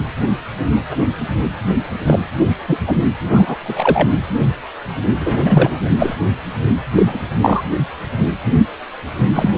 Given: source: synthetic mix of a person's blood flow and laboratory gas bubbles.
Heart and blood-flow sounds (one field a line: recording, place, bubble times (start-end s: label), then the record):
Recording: Doppler ultrasound of blood flow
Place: precordium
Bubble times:
2.06-2.19 s: bubbles
2.68-2.78 s: bubbles
2.87-2.96 s: bubbles
3.30-3.56 s: bubbles
3.63-4.09 s: bubbles
5.19-5.79 s: bubbles
5.82-5.90 s: bubbles
5.98-6.15 s: bubbles
6.95-7.25 s: bubbles
7.42-7.62 s: bubbles
9.34-9.50 s: bubbles
From the record:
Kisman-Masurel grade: 233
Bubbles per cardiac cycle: several, 3 to 8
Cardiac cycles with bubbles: 50 to 99%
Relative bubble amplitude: loud (0.450 to 0.775)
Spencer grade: 3 (all of the cardiac periods contain showers or single bubble signals, but not dominating or overriding the cardiac motion signals)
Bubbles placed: anywhere in the cardiac cycle